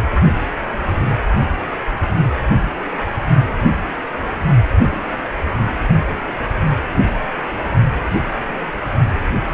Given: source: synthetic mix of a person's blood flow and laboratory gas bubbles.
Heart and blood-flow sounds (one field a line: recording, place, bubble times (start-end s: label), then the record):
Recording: Doppler ultrasound of blood flow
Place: precordium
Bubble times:
4.89-5.00 s: bubbles
5.12-5.17 s: bubbles
From the record:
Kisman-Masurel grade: 121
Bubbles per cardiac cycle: 1 to 2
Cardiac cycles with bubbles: 10 to 50%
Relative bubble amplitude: barely perceptible (0.100 to 0.250)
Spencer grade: 2 (many but less than half of the cardiac periods contain bubble signals, singularly or in groups)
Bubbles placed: only in the low amplitude regions of the cardiac cycle